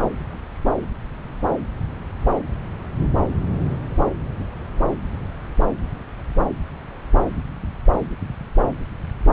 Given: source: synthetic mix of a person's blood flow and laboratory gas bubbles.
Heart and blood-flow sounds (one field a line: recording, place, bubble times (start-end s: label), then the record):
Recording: Doppler ultrasound of blood flow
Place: subclavian vein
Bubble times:
no bubbles
From the record:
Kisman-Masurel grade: 000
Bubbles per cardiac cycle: 0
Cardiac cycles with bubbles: 0%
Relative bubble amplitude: no bubbles discernible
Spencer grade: 0 (complete lack of bubble signals)